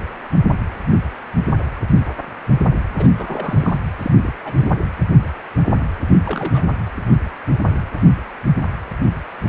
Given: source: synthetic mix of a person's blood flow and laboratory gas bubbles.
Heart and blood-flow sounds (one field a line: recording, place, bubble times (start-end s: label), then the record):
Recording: Doppler ultrasound of blood flow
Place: precordium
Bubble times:
2.96-3.10 s: bubbles
3.17-3.79 s: bubbles
4.02-4.12 s: bubbles
4.18-4.32 s: bubbles
4.39-4.71 s: bubbles
6.25-6.64 s: bubbles
From the record:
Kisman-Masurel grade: 221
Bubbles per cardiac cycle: several, 3 to 8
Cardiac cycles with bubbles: 10 to 50%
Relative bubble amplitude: barely perceptible (0.100 to 0.250)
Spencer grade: 2 (many but less than half of the cardiac periods contain bubble signals, singularly or in groups)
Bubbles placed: anywhere in the cardiac cycle